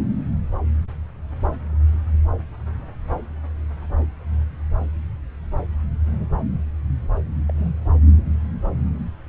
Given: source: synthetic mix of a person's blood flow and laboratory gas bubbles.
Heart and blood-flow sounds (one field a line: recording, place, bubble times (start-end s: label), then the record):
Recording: Doppler ultrasound of blood flow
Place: subclavian vein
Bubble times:
6.08-6.17 s: bubbles
6.19-6.27 s: bubbles
7.49-7.52 s: bubbles
7.55-7.71 s: bubbles
From the record:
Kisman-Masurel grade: 121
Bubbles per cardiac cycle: 1 to 2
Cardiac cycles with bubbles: 10 to 50%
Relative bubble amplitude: barely perceptible (0.100 to 0.250)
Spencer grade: 2 (many but less than half of the cardiac periods contain bubble signals, singularly or in groups)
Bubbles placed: anywhere in the cardiac cycle